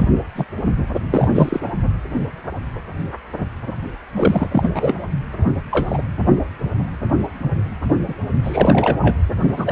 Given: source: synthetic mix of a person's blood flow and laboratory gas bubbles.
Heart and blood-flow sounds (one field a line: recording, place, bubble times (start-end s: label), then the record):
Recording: Doppler ultrasound of blood flow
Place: precordium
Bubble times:
0.00-0.09 s: bubbles
0.35-0.45 s: bubbles
1.10-1.28 s: bubbles
1.33-1.61 s: bubbles
4.12-4.48 s: bubbles
4.52-4.97 s: bubbles
5.71-6.02 s: bubbles
8.08-8.14 s: bubbles
8.42-8.98 s: bubbles
9.01-9.16 s: bubbles
9.41-9.71 s: bubbles
From the record:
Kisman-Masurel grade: 233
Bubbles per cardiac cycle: several, 3 to 8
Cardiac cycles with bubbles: 50 to 99%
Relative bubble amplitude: loud (0.450 to 0.775)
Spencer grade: 3 (all of the cardiac periods contain showers or single bubble signals, but not dominating or overriding the cardiac motion signals)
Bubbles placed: only in the low amplitude regions of the cardiac cycle